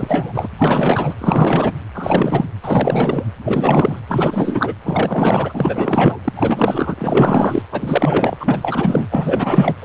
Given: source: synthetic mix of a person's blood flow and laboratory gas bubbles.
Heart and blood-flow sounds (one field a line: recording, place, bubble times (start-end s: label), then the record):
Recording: Doppler ultrasound of blood flow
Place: precordium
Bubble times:
0.00-0.48 s: bubbles
0.58-1.15 s: bubbles
1.18-1.72 s: bubbles
1.94-2.46 s: bubbles
2.64-3.25 s: bubbles
3.44-4.00 s: bubbles
4.08-4.74 s: bubbles
4.85-6.20 s: bubbles
6.24-6.33 s: bubbles
6.36-7.62 s: bubbles
7.72-8.37 s: bubbles
8.40-8.58 s: bubbles
8.62-9.06 s: bubbles
9.11-9.75 s: bubbles
9.81-9.85 s: bubbles
From the record:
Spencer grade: 4 (maximum detectable bubble signal sounding continuously throughout systole and diastole of every cardiac period, and overriding the amplitude of the normal cardiac signals)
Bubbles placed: anywhere in the cardiac cycle